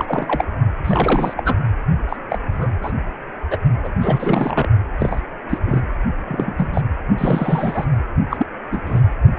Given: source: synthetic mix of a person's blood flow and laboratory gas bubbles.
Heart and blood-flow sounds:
Doppler ultrasound of blood flow; precordium
0.00-0.44 s: bubbles
0.84-1.33 s: bubbles
1.36-1.55 s: bubbles
2.08-2.17 s: bubbles
2.30-2.41 s: bubbles
2.52-2.71 s: bubbles
2.83-2.93 s: bubbles
3.50-3.57 s: bubbles
3.84-3.88 s: bubbles
4.00-4.67 s: bubbles
4.99-5.21 s: bubbles
5.49-5.58 s: bubbles
5.66-5.82 s: bubbles
6.26-6.54 s: bubbles
6.58-6.81 s: bubbles
7.18-7.85 s: bubbles
8.30-8.46 s: bubbles
8.71-8.80 s: bubbles
8.86-9.01 s: bubbles
9.37-9.39 s: bubbles
From the record:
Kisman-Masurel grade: 242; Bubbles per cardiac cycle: several, 3 to 8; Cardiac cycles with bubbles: 100%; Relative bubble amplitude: moderate (0.250 to 0.450); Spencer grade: 3 (all of the cardiac periods contain showers or single bubble signals, but not dominating or overriding the cardiac motion signals); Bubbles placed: only in the low amplitude regions of the cardiac cycle

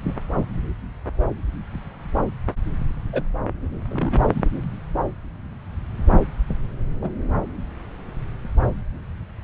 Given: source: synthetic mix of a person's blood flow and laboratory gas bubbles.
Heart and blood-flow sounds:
Doppler ultrasound of blood flow; subclavian vein
0.07-0.12 s: bubbles
3.12-3.23 s: bubbles
3.91-4.21 s: bubbles
4.34-4.41 s: bubbles
7.01-7.10 s: bubbles
From the record:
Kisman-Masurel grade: 122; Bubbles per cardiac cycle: 1 to 2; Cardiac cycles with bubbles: 10 to 50%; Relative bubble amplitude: moderate (0.250 to 0.450); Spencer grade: 2 (many but less than half of the cardiac periods contain bubble signals, singularly or in groups); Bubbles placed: anywhere in the cardiac cycle

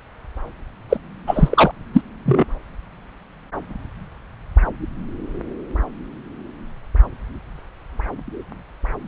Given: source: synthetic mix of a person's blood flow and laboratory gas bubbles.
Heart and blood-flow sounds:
Doppler ultrasound of blood flow; subclavian vein
0.90-0.98 s: bubbles
1.27-1.71 s: bubbles
1.93-2.01 s: bubbles
2.25-2.45 s: bubbles
From the record:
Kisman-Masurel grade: 213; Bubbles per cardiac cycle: several, 3 to 8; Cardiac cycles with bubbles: 1 to 10%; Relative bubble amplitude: loud (0.450 to 0.775); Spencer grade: 1 (occasional bubble signal discernible with the cardiac motion signal, with majority of cardiac periods free of bubbles); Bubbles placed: anywhere in the cardiac cycle

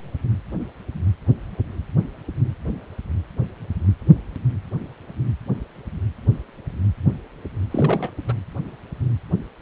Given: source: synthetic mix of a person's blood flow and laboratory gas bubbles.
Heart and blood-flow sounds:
Doppler ultrasound of blood flow; precordium
7.71-8.12 s: bubbles
8.28-8.34 s: bubbles
From the record:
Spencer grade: 1 (occasional bubble signal discernible with the cardiac motion signal, with majority of cardiac periods free of bubbles); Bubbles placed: anywhere in the cardiac cycle

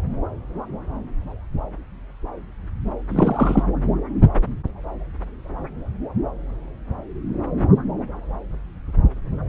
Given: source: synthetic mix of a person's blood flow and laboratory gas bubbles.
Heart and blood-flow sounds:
Doppler ultrasound of blood flow; subclavian vein
3.09-3.63 s: bubbles
From the record:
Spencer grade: 1 (occasional bubble signal discernible with the cardiac motion signal, with majority of cardiac periods free of bubbles); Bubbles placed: anywhere in the cardiac cycle

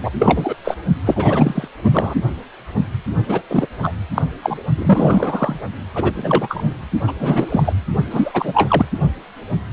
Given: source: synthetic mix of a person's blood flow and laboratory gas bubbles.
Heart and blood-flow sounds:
Doppler ultrasound of blood flow; precordium
0.00-0.11 s: bubbles
0.18-0.55 s: bubbles
0.64-0.75 s: bubbles
1.05-1.68 s: bubbles
1.81-2.15 s: bubbles
3.27-3.42 s: bubbles
3.49-3.67 s: bubbles
3.82-3.93 s: bubbles
4.14-4.22 s: bubbles
4.42-4.59 s: bubbles
4.75-5.60 s: bubbles
5.94-6.73 s: bubbles
7.07-7.12 s: bubbles
7.19-7.73 s: bubbles
8.11-8.86 s: bubbles
From the record:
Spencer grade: 3 (all of the cardiac periods contain showers or single bubble signals, but not dominating or overriding the cardiac motion signals); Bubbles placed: only in the low amplitude regions of the cardiac cycle

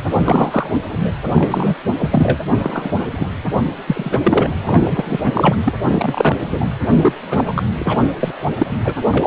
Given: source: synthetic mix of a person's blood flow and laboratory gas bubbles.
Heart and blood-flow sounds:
Doppler ultrasound of blood flow; precordium
0.24-0.70 s: bubbles
0.88-1.11 s: bubbles
1.32-1.75 s: bubbles
1.98-2.38 s: bubbles
2.62-3.06 s: bubbles
3.11-3.27 s: bubbles
3.87-4.19 s: bubbles
4.22-4.50 s: bubbles
4.62-5.18 s: bubbles
5.23-5.55 s: bubbles
5.65-5.73 s: bubbles
5.88-6.37 s: bubbles
6.50-6.66 s: bubbles
7.01-7.13 s: bubbles
7.26-7.63 s: bubbles
7.79-8.08 s: bubbles
8.20-8.32 s: bubbles
8.59-8.67 s: bubbles
8.71-8.77 s: bubbles
8.84-8.95 s: bubbles
9.12-9.27 s: bubbles
From the record:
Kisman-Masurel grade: 243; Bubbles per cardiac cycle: several, 3 to 8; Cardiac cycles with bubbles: 100%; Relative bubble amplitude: loud (0.450 to 0.775); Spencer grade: 3 (all of the cardiac periods contain showers or single bubble signals, but not dominating or overriding the cardiac motion signals); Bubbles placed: anywhere in the cardiac cycle

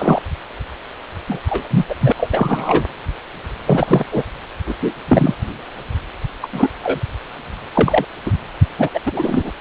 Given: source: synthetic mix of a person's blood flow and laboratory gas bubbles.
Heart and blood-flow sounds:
Doppler ultrasound of blood flow; precordium
0.00-0.22 s: bubbles
1.28-1.40 s: bubbles
1.46-1.86 s: bubbles
1.89-1.95 s: bubbles
2.00-2.12 s: bubbles
2.17-2.29 s: bubbles
2.31-2.85 s: bubbles
3.66-4.05 s: bubbles
4.12-4.23 s: bubbles
4.66-4.76 s: bubbles
4.80-4.93 s: bubbles
5.08-5.35 s: bubbles
6.42-6.48 s: bubbles
6.53-6.69 s: bubbles
6.83-7.01 s: bubbles
7.74-8.05 s: bubbles
8.25-8.31 s: bubbles
8.78-8.89 s: bubbles
8.93-9.00 s: bubbles
9.06-9.51 s: bubbles
From the record:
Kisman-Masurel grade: 233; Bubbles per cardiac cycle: several, 3 to 8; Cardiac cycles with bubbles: 50 to 99%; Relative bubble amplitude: loud (0.450 to 0.775); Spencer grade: 3 (all of the cardiac periods contain showers or single bubble signals, but not dominating or overriding the cardiac motion signals); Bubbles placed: anywhere in the cardiac cycle

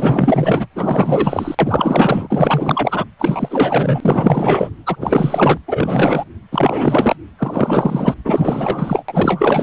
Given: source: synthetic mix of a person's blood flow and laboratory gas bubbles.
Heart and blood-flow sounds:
Doppler ultrasound of blood flow; precordium
0.00-0.67 s: bubbles
0.76-1.55 s: bubbles
1.58-3.04 s: bubbles
3.18-4.69 s: bubbles
4.86-4.96 s: bubbles
5.00-5.58 s: bubbles
5.67-6.24 s: bubbles
6.51-7.15 s: bubbles
7.38-8.14 s: bubbles
8.24-9.03 s: bubbles
9.08-9.63 s: bubbles
From the record:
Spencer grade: 4 (maximum detectable bubble signal sounding continuously throughout systole and diastole of every cardiac period, and overriding the amplitude of the normal cardiac signals); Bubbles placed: anywhere in the cardiac cycle

